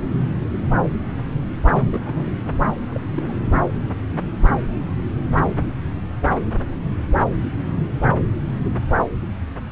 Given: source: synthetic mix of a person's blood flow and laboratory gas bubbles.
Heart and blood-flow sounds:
Doppler ultrasound of blood flow; subclavian vein
0.04-0.13 s: bubbles
1.73-1.88 s: bubbles
1.90-2.31 s: bubbles
2.92-3.00 s: bubbles
3.15-3.37 s: bubbles
From the record:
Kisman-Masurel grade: 221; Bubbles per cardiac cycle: several, 3 to 8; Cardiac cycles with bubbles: 10 to 50%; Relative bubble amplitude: barely perceptible (0.100 to 0.250); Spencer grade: 2 (many but less than half of the cardiac periods contain bubble signals, singularly or in groups); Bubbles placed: anywhere in the cardiac cycle

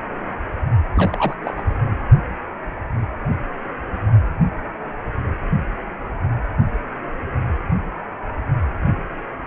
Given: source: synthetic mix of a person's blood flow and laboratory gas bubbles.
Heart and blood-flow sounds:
Doppler ultrasound of blood flow; precordium
0.95-1.34 s: bubbles
1.43-1.53 s: bubbles
1.56-1.60 s: bubbles
1.69-1.74 s: bubbles
From the record:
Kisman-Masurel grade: 211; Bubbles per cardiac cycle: several, 3 to 8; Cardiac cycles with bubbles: 1 to 10%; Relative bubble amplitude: barely perceptible (0.100 to 0.250); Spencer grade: 1 (occasional bubble signal discernible with the cardiac motion signal, with majority of cardiac periods free of bubbles); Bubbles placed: anywhere in the cardiac cycle

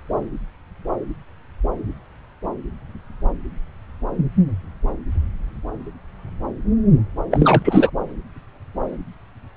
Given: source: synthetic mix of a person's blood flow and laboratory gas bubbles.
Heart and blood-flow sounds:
Doppler ultrasound of blood flow; subclavian vein
7.31-7.90 s: bubbles
From the record:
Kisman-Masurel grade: 213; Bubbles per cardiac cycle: several, 3 to 8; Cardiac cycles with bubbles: 1 to 10%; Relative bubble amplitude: loud (0.450 to 0.775); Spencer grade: 1 (occasional bubble signal discernible with the cardiac motion signal, with majority of cardiac periods free of bubbles); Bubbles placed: anywhere in the cardiac cycle

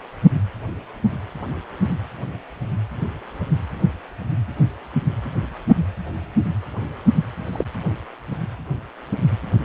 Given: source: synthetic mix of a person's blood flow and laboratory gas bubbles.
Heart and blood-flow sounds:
Doppler ultrasound of blood flow; precordium
7.52-7.65 s: bubbles
From the record:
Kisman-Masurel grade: 123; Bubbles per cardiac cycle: 1 to 2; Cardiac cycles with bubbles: 10 to 50%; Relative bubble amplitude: loud (0.450 to 0.775); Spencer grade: 2 (many but less than half of the cardiac periods contain bubble signals, singularly or in groups); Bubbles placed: anywhere in the cardiac cycle

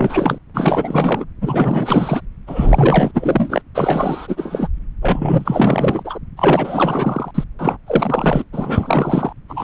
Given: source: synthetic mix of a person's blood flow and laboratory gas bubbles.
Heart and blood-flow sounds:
Doppler ultrasound of blood flow; subclavian vein
0.00-0.39 s: bubbles
0.54-1.25 s: bubbles
1.41-2.21 s: bubbles
2.47-3.62 s: bubbles
3.75-4.67 s: bubbles
5.01-6.19 s: bubbles
6.37-7.31 s: bubbles
7.34-7.44 s: bubbles
7.59-7.77 s: bubbles
7.87-8.45 s: bubbles
8.53-9.32 s: bubbles
9.48-9.64 s: bubbles
From the record:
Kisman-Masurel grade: 444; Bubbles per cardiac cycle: continuous sound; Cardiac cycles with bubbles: 100%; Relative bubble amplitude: maximal (0.775 to 0.999); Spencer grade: 4 (maximum detectable bubble signal sounding continuously throughout systole and diastole of every cardiac period, and overriding the amplitude of the normal cardiac signals); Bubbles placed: anywhere in the cardiac cycle

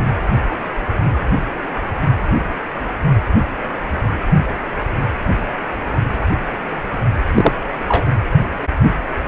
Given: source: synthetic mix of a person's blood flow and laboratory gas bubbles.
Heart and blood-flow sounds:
Doppler ultrasound of blood flow; precordium
7.35-7.52 s: bubbles
7.88-8.04 s: bubbles
From the record:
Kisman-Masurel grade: 113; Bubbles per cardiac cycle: 1 to 2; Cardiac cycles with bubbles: 1 to 10%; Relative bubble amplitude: loud (0.450 to 0.775); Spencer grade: 1 (occasional bubble signal discernible with the cardiac motion signal, with majority of cardiac periods free of bubbles); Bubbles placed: anywhere in the cardiac cycle

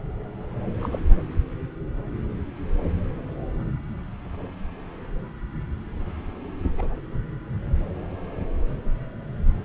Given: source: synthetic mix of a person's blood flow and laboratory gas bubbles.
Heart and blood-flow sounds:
Doppler ultrasound of blood flow; subclavian vein
0.81-0.89 s: bubbles
0.92-0.99 s: bubbles
6.78-6.98 s: bubbles
From the record:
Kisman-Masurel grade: 121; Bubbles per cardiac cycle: 1 to 2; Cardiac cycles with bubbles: 10 to 50%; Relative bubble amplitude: barely perceptible (0.100 to 0.250); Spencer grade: 2 (many but less than half of the cardiac periods contain bubble signals, singularly or in groups); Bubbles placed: anywhere in the cardiac cycle

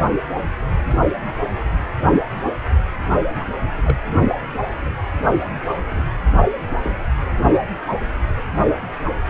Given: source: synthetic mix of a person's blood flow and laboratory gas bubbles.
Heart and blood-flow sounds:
Doppler ultrasound of blood flow; precordium
3.40-3.44 s: bubbles
3.85-3.96 s: bubbles
5.25-5.32 s: bubbles
5.91-6.04 s: bubbles
6.83-6.94 s: bubbles
From the record:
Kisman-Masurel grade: 121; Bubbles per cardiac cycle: 1 to 2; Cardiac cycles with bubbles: 10 to 50%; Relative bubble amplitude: barely perceptible (0.100 to 0.250); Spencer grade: 2 (many but less than half of the cardiac periods contain bubble signals, singularly or in groups); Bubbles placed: anywhere in the cardiac cycle

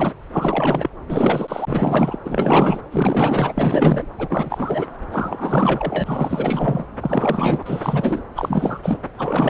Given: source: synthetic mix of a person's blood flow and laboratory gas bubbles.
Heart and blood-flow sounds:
Doppler ultrasound of blood flow; subclavian vein
0.00-0.13 s: bubbles
0.32-0.90 s: bubbles
1.08-2.19 s: bubbles
2.24-2.80 s: bubbles
2.91-4.07 s: bubbles
4.18-4.87 s: bubbles
5.11-6.86 s: bubbles
7.01-8.22 s: bubbles
8.35-8.97 s: bubbles
9.18-9.50 s: bubbles
From the record:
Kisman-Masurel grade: 444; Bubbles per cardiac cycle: continuous sound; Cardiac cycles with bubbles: 100%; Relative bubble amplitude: maximal (0.775 to 0.999); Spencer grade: 4 (maximum detectable bubble signal sounding continuously throughout systole and diastole of every cardiac period, and overriding the amplitude of the normal cardiac signals); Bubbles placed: anywhere in the cardiac cycle

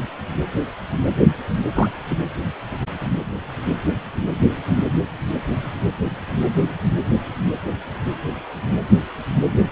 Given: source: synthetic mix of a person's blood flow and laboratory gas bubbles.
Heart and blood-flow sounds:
Doppler ultrasound of blood flow; precordium
1.74-1.90 s: bubbles
2.10-2.15 s: bubbles
From the record:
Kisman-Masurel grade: 112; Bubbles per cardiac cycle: 1 to 2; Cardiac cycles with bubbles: 1 to 10%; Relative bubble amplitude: moderate (0.250 to 0.450); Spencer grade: 1 (occasional bubble signal discernible with the cardiac motion signal, with majority of cardiac periods free of bubbles); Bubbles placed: anywhere in the cardiac cycle

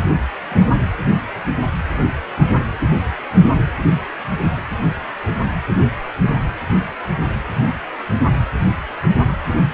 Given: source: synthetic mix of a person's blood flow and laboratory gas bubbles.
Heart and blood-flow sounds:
Doppler ultrasound of blood flow; precordium
0.49-0.77 s: bubbles
From the record:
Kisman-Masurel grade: 112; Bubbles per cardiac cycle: 1 to 2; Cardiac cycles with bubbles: 1 to 10%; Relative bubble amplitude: moderate (0.250 to 0.450); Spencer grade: 1 (occasional bubble signal discernible with the cardiac motion signal, with majority of cardiac periods free of bubbles); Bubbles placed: anywhere in the cardiac cycle

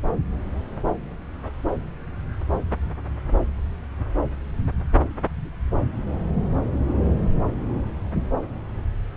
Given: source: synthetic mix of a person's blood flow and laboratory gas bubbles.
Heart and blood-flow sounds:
Doppler ultrasound of blood flow; subclavian vein
no bubbles
From the record:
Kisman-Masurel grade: 000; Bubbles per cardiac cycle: 0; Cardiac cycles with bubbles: 0%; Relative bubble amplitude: no bubbles discernible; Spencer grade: 0 (complete lack of bubble signals)

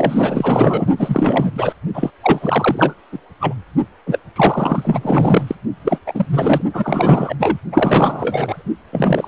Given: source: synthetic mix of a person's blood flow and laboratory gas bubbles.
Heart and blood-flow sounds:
Doppler ultrasound of blood flow; precordium
0.00-0.88 s: bubbles
0.97-1.52 s: bubbles
1.54-1.73 s: bubbles
1.94-2.10 s: bubbles
2.23-2.94 s: bubbles
3.12-3.19 s: bubbles
3.40-3.54 s: bubbles
4.06-4.19 s: bubbles
4.35-5.55 s: bubbles
5.84-5.98 s: bubbles
6.06-6.25 s: bubbles
6.29-6.61 s: bubbles
6.73-7.35 s: bubbles
7.39-7.57 s: bubbles
7.72-8.63 s: bubbles
8.92-9.28 s: bubbles
From the record:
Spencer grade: 4 (maximum detectable bubble signal sounding continuously throughout systole and diastole of every cardiac period, and overriding the amplitude of the normal cardiac signals); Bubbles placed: only in the low amplitude regions of the cardiac cycle

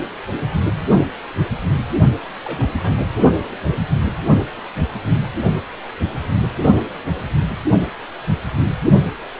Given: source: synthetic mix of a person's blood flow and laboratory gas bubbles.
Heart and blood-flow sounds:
Doppler ultrasound of blood flow; precordium
2.44-2.94 s: bubbles
2.97-3.05 s: bubbles
From the record:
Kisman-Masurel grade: 211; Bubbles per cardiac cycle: several, 3 to 8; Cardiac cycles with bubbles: 1 to 10%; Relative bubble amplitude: barely perceptible (0.100 to 0.250); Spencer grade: 1 (occasional bubble signal discernible with the cardiac motion signal, with majority of cardiac periods free of bubbles); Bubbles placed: only in the low amplitude regions of the cardiac cycle

